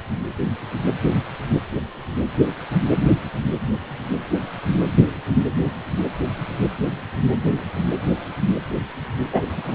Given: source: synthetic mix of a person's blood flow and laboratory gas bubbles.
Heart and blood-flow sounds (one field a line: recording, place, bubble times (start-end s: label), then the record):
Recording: Doppler ultrasound of blood flow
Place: precordium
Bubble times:
9.32-9.43 s: bubbles
9.49-9.75 s: bubbles
From the record:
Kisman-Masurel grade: 213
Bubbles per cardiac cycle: several, 3 to 8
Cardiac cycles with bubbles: 1 to 10%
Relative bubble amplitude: loud (0.450 to 0.775)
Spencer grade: 1 (occasional bubble signal discernible with the cardiac motion signal, with majority of cardiac periods free of bubbles)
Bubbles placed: anywhere in the cardiac cycle